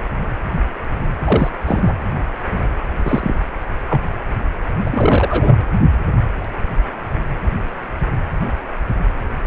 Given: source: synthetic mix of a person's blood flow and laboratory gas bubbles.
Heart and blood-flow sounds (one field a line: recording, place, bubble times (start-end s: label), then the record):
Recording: Doppler ultrasound of blood flow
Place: precordium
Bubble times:
1.24-1.50 s: bubbles
1.66-1.93 s: bubbles
3.04-3.35 s: bubbles
3.90-4.01 s: bubbles
4.86-5.56 s: bubbles
From the record:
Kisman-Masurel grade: 223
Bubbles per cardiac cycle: several, 3 to 8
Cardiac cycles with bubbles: 10 to 50%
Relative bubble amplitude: loud (0.450 to 0.775)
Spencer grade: 2 (many but less than half of the cardiac periods contain bubble signals, singularly or in groups)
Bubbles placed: anywhere in the cardiac cycle